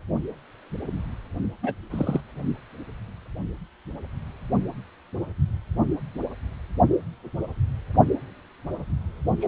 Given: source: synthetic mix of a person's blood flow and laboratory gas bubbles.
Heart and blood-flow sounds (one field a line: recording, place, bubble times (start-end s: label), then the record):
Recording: Doppler ultrasound of blood flow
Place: precordium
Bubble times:
1.62-1.75 s: bubbles
1.90-2.20 s: bubbles
9.40-9.48 s: bubbles
From the record:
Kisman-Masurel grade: 222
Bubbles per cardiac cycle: several, 3 to 8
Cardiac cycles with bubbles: 10 to 50%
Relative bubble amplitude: moderate (0.250 to 0.450)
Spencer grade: 2 (many but less than half of the cardiac periods contain bubble signals, singularly or in groups)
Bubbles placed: only in the low amplitude regions of the cardiac cycle